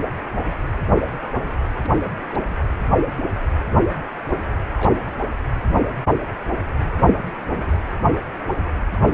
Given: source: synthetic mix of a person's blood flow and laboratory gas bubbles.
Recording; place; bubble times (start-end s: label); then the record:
Doppler ultrasound of blood flow; precordium
1.83-2.11 s: bubbles
2.29-2.43 s: bubbles
2.46-2.55 s: bubbles
4.78-5.01 s: bubbles
5.13-5.19 s: bubbles
6.79-7.13 s: bubbles
7.26-7.30 s: bubbles
7.42-7.81 s: bubbles
From the record:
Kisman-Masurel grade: 221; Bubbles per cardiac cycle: several, 3 to 8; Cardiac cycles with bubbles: 10 to 50%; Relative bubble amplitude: barely perceptible (0.100 to 0.250); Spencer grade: 2 (many but less than half of the cardiac periods contain bubble signals, singularly or in groups); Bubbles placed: anywhere in the cardiac cycle